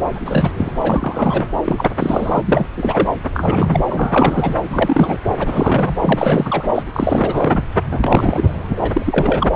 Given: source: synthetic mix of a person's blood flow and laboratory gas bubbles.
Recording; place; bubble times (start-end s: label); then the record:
Doppler ultrasound of blood flow; subclavian vein
0.16-0.20 s: bubbles
0.26-0.51 s: bubbles
0.56-0.72 s: bubbles
0.80-1.48 s: bubbles
1.64-1.89 s: bubbles
1.99-2.42 s: bubbles
2.45-2.67 s: bubbles
2.77-3.08 s: bubbles
3.33-3.80 s: bubbles
3.88-4.54 s: bubbles
4.70-5.18 s: bubbles
5.38-5.96 s: bubbles
6.02-6.63 s: bubbles
6.75-6.83 s: bubbles
6.92-7.63 s: bubbles
7.91-8.75 s: bubbles
8.82-9.49 s: bubbles
From the record:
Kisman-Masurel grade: 343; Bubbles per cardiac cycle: rolling drumbeat, 9 or more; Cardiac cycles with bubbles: 100%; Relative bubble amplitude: loud (0.450 to 0.775); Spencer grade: 3 (all of the cardiac periods contain showers or single bubble signals, but not dominating or overriding the cardiac motion signals); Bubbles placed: anywhere in the cardiac cycle